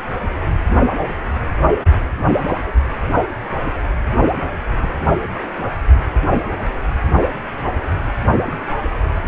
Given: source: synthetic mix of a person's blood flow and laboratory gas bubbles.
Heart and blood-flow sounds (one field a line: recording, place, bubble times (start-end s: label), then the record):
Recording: Doppler ultrasound of blood flow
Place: precordium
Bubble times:
2.57-2.71 s: bubbles
4.81-4.88 s: bubbles
5.62-5.67 s: bubbles
8.46-8.50 s: bubbles
From the record:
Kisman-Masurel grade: 121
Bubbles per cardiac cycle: 1 to 2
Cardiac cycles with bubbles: 10 to 50%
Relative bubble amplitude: barely perceptible (0.100 to 0.250)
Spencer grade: 2 (many but less than half of the cardiac periods contain bubble signals, singularly or in groups)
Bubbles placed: only in the low amplitude regions of the cardiac cycle